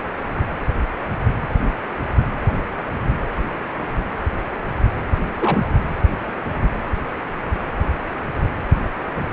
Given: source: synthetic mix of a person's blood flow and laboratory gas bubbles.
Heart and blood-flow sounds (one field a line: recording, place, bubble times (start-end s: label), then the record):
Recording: Doppler ultrasound of blood flow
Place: precordium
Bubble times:
5.40-5.64 s: bubbles
5.71-5.75 s: bubbles
From the record:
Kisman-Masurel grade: 212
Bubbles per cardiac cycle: several, 3 to 8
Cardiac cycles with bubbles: 1 to 10%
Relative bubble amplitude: moderate (0.250 to 0.450)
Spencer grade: 1 (occasional bubble signal discernible with the cardiac motion signal, with majority of cardiac periods free of bubbles)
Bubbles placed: anywhere in the cardiac cycle